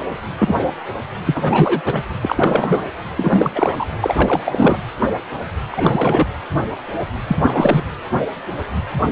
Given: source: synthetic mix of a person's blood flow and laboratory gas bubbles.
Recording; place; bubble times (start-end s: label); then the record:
Doppler ultrasound of blood flow; precordium
0.39-0.56 s: bubbles
1.26-1.82 s: bubbles
1.85-2.03 s: bubbles
2.21-2.89 s: bubbles
3.17-3.51 s: bubbles
3.55-3.85 s: bubbles
4.02-4.78 s: bubbles
5.71-6.27 s: bubbles
7.28-7.83 s: bubbles
From the record:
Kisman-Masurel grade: 333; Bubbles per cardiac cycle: rolling drumbeat, 9 or more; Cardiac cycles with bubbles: 50 to 99%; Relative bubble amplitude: loud (0.450 to 0.775); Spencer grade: 3 (all of the cardiac periods contain showers or single bubble signals, but not dominating or overriding the cardiac motion signals); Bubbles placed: anywhere in the cardiac cycle